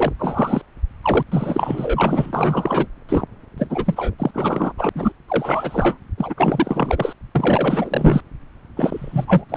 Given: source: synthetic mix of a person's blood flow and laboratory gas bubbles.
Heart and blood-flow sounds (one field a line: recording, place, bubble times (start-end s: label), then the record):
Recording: Doppler ultrasound of blood flow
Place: subclavian vein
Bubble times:
0.00-0.13 s: bubbles
0.18-0.61 s: bubbles
1.03-1.23 s: bubbles
1.31-2.88 s: bubbles
3.08-3.26 s: bubbles
3.57-4.14 s: bubbles
4.19-4.73 s: bubbles
4.78-4.90 s: bubbles
4.95-5.12 s: bubbles
5.28-5.98 s: bubbles
6.17-6.34 s: bubbles
6.37-7.13 s: bubbles
7.35-8.21 s: bubbles
8.76-9.45 s: bubbles
9.48-9.57 s: bubbles
From the record:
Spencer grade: 4 (maximum detectable bubble signal sounding continuously throughout systole and diastole of every cardiac period, and overriding the amplitude of the normal cardiac signals)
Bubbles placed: anywhere in the cardiac cycle